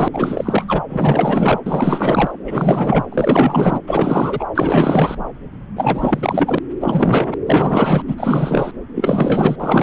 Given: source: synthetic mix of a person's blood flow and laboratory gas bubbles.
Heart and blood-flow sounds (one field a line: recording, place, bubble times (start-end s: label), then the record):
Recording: Doppler ultrasound of blood flow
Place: subclavian vein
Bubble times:
0.00-0.08 s: bubbles
0.13-0.65 s: bubbles
0.67-0.81 s: bubbles
0.89-1.60 s: bubbles
1.66-2.31 s: bubbles
2.45-3.05 s: bubbles
3.12-3.80 s: bubbles
3.87-4.45 s: bubbles
4.54-5.17 s: bubbles
5.75-6.58 s: bubbles
6.80-7.34 s: bubbles
7.46-8.02 s: bubbles
8.07-8.71 s: bubbles
8.94-9.56 s: bubbles
9.59-9.83 s: bubbles
From the record:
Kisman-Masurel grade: 444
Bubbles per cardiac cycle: continuous sound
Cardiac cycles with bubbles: 100%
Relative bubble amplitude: maximal (0.775 to 0.999)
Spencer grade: 4 (maximum detectable bubble signal sounding continuously throughout systole and diastole of every cardiac period, and overriding the amplitude of the normal cardiac signals)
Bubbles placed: anywhere in the cardiac cycle